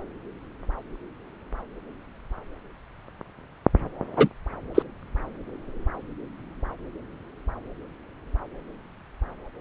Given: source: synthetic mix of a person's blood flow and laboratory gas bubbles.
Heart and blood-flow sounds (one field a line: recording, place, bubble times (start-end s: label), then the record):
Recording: Doppler ultrasound of blood flow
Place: subclavian vein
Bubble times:
4.16-4.28 s: bubbles
4.75-4.83 s: bubbles
From the record:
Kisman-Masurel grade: 123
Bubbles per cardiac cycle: 1 to 2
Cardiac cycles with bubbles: 10 to 50%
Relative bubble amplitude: loud (0.450 to 0.775)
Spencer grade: 2 (many but less than half of the cardiac periods contain bubble signals, singularly or in groups)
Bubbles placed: anywhere in the cardiac cycle